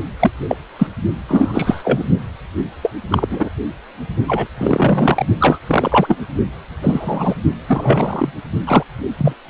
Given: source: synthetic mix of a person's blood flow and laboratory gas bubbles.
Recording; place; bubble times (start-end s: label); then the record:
Doppler ultrasound of blood flow; precordium
0.19-0.31 s: bubbles
0.48-0.57 s: bubbles
0.79-0.87 s: bubbles
1.28-2.04 s: bubbles
2.83-2.91 s: bubbles
3.11-3.27 s: bubbles
3.30-3.49 s: bubbles
4.27-4.47 s: bubbles
4.57-5.25 s: bubbles
5.40-5.58 s: bubbles
5.67-6.17 s: bubbles
6.81-7.35 s: bubbles
7.67-8.33 s: bubbles
8.67-8.84 s: bubbles
9.17-9.34 s: bubbles
From the record:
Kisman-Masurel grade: 233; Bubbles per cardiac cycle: several, 3 to 8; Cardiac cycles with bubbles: 50 to 99%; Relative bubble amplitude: loud (0.450 to 0.775); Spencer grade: 3 (all of the cardiac periods contain showers or single bubble signals, but not dominating or overriding the cardiac motion signals); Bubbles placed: only in the low amplitude regions of the cardiac cycle